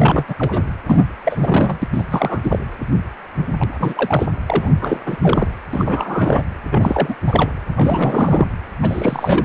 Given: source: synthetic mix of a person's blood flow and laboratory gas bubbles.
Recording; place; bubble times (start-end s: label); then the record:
Doppler ultrasound of blood flow; precordium
0.00-0.24 s: bubbles
0.28-0.34 s: bubbles
0.39-0.64 s: bubbles
0.87-1.04 s: bubbles
1.25-1.79 s: bubbles
1.82-1.88 s: bubbles
1.92-2.04 s: bubbles
2.11-2.39 s: bubbles
2.43-2.58 s: bubbles
3.58-4.26 s: bubbles
4.46-4.72 s: bubbles
4.82-4.97 s: bubbles
5.06-5.58 s: bubbles
5.73-6.42 s: bubbles
6.71-7.15 s: bubbles
7.26-7.52 s: bubbles
7.75-8.54 s: bubbles
8.82-9.45 s: bubbles
From the record:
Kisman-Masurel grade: 333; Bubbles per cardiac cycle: rolling drumbeat, 9 or more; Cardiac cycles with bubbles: 50 to 99%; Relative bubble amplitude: loud (0.450 to 0.775); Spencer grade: 3 (all of the cardiac periods contain showers or single bubble signals, but not dominating or overriding the cardiac motion signals); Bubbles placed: anywhere in the cardiac cycle